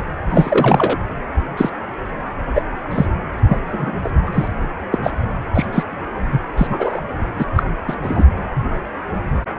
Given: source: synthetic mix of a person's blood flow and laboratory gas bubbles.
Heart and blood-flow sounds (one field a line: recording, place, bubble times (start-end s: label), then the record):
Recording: Doppler ultrasound of blood flow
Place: precordium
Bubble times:
0.29-0.96 s: bubbles
1.57-1.70 s: bubbles
2.54-2.62 s: bubbles
2.90-3.06 s: bubbles
3.48-3.58 s: bubbles
3.72-3.91 s: bubbles
4.04-4.10 s: bubbles
4.26-4.30 s: bubbles
4.32-4.48 s: bubbles
4.92-4.98 s: bubbles
5.03-5.11 s: bubbles
5.55-5.66 s: bubbles
5.72-5.85 s: bubbles
6.32-6.41 s: bubbles
6.57-7.00 s: bubbles
7.39-7.46 s: bubbles
7.55-7.63 s: bubbles
7.88-7.96 s: bubbles
8.03-8.25 s: bubbles
From the record:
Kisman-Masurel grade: 233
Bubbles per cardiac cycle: several, 3 to 8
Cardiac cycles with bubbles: 50 to 99%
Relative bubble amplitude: loud (0.450 to 0.775)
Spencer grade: 3 (all of the cardiac periods contain showers or single bubble signals, but not dominating or overriding the cardiac motion signals)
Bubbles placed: anywhere in the cardiac cycle